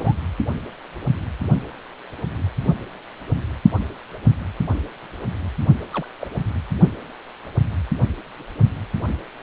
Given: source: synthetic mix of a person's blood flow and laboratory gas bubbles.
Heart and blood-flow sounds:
Doppler ultrasound of blood flow; precordium
0.00-0.13 s: bubbles
5.80-5.85 s: bubbles
5.93-6.06 s: bubbles
6.21-6.31 s: bubbles
From the record:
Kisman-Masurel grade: 221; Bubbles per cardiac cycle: several, 3 to 8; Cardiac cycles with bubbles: 10 to 50%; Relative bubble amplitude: barely perceptible (0.100 to 0.250); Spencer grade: 2 (many but less than half of the cardiac periods contain bubble signals, singularly or in groups); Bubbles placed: only in the low amplitude regions of the cardiac cycle

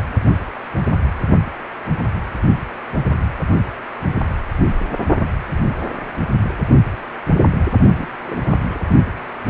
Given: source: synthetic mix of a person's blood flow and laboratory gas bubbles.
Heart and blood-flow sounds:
Doppler ultrasound of blood flow; precordium
7.94-8.08 s: bubbles
8.22-8.91 s: bubbles
From the record:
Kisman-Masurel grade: 211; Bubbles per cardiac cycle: several, 3 to 8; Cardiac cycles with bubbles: 1 to 10%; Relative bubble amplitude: barely perceptible (0.100 to 0.250); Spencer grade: 1 (occasional bubble signal discernible with the cardiac motion signal, with majority of cardiac periods free of bubbles); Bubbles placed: only in the low amplitude regions of the cardiac cycle

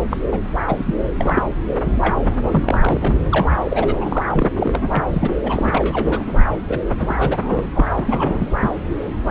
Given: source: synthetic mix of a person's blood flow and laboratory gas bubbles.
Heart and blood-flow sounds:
Doppler ultrasound of blood flow; subclavian vein
0.10-0.18 s: bubbles
0.31-0.39 s: bubbles
0.67-0.95 s: bubbles
1.18-1.43 s: bubbles
1.81-1.92 s: bubbles
2.00-2.16 s: bubbles
2.43-3.17 s: bubbles
3.31-3.47 s: bubbles
3.65-4.49 s: bubbles
4.59-5.03 s: bubbles
5.08-5.35 s: bubbles
5.43-6.44 s: bubbles
6.69-6.79 s: bubbles
6.99-7.15 s: bubbles
7.18-7.67 s: bubbles
7.74-7.85 s: bubbles
7.96-8.55 s: bubbles
8.59-8.71 s: bubbles
From the record:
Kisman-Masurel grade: 342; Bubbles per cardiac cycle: rolling drumbeat, 9 or more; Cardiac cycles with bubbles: 100%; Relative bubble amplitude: moderate (0.250 to 0.450); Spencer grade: 3 (all of the cardiac periods contain showers or single bubble signals, but not dominating or overriding the cardiac motion signals); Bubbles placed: anywhere in the cardiac cycle

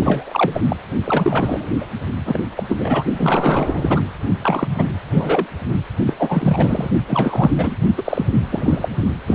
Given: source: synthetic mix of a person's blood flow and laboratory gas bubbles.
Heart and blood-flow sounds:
Doppler ultrasound of blood flow; precordium
0.00-0.61 s: bubbles
0.68-0.76 s: bubbles
1.05-1.86 s: bubbles
2.26-2.40 s: bubbles
2.56-2.64 s: bubbles
2.69-3.04 s: bubbles
3.17-4.03 s: bubbles
4.42-4.68 s: bubbles
4.77-4.84 s: bubbles
5.14-5.46 s: bubbles
6.06-6.13 s: bubbles
6.19-6.91 s: bubbles
7.07-7.51 s: bubbles
7.56-7.76 s: bubbles
7.97-8.25 s: bubbles
8.50-8.89 s: bubbles
9.26-9.34 s: bubbles
From the record:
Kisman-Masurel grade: 343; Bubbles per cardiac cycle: rolling drumbeat, 9 or more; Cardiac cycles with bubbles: 100%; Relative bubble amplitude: loud (0.450 to 0.775); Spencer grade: 3 (all of the cardiac periods contain showers or single bubble signals, but not dominating or overriding the cardiac motion signals); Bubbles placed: only in the low amplitude regions of the cardiac cycle

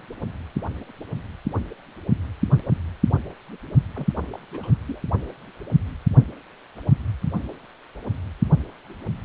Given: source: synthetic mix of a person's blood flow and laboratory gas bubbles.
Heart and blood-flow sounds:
Doppler ultrasound of blood flow; precordium
3.95-4.07 s: bubbles
4.32-4.39 s: bubbles
4.52-4.78 s: bubbles
4.88-5.01 s: bubbles
From the record:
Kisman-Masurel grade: 221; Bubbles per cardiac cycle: several, 3 to 8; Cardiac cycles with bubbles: 10 to 50%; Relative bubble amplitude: barely perceptible (0.100 to 0.250); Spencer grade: 2 (many but less than half of the cardiac periods contain bubble signals, singularly or in groups); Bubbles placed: only in the low amplitude regions of the cardiac cycle

